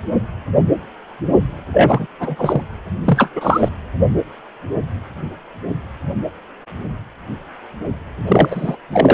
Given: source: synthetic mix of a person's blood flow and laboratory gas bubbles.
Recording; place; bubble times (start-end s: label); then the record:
Doppler ultrasound of blood flow; precordium
1.73-2.06 s: bubbles
2.19-2.62 s: bubbles
3.04-3.30 s: bubbles
3.35-3.68 s: bubbles
8.28-8.77 s: bubbles
8.92-9.14 s: bubbles
From the record:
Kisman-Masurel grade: 223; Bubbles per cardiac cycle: several, 3 to 8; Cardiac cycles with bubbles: 10 to 50%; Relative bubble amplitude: loud (0.450 to 0.775); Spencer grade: 2 (many but less than half of the cardiac periods contain bubble signals, singularly or in groups); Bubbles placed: anywhere in the cardiac cycle